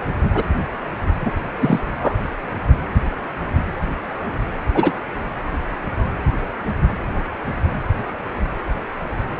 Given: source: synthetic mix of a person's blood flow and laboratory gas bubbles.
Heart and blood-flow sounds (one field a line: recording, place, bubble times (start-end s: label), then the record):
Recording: Doppler ultrasound of blood flow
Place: precordium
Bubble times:
0.34-0.43 s: bubbles
1.20-1.31 s: bubbles
1.60-1.79 s: bubbles
2.00-2.15 s: bubbles
4.74-4.92 s: bubbles
From the record:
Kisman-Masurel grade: 123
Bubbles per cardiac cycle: 1 to 2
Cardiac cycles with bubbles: 10 to 50%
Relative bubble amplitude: loud (0.450 to 0.775)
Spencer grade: 2 (many but less than half of the cardiac periods contain bubble signals, singularly or in groups)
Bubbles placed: anywhere in the cardiac cycle